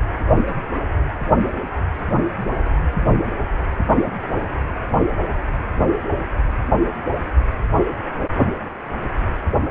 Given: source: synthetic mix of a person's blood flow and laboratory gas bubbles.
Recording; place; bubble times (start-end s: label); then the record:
Doppler ultrasound of blood flow; precordium
no bubbles
From the record:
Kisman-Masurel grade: 000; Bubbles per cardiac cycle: 0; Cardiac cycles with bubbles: 0%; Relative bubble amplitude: no bubbles discernible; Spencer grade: 0 (complete lack of bubble signals)